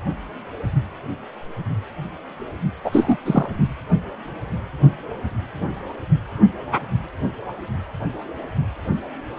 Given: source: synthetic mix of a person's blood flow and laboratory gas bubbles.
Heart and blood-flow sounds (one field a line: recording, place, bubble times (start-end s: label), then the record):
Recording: Doppler ultrasound of blood flow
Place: precordium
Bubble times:
2.84-3.17 s: bubbles
3.25-3.47 s: bubbles
From the record:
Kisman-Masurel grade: 213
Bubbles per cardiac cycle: several, 3 to 8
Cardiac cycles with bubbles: 1 to 10%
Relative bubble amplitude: loud (0.450 to 0.775)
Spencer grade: 1 (occasional bubble signal discernible with the cardiac motion signal, with majority of cardiac periods free of bubbles)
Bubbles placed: anywhere in the cardiac cycle